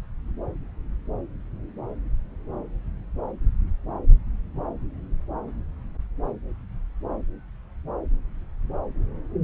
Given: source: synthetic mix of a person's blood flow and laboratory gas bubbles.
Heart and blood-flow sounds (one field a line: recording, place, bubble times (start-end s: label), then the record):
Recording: Doppler ultrasound of blood flow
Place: subclavian vein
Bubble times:
no bubbles
From the record:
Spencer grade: 0 (complete lack of bubble signals)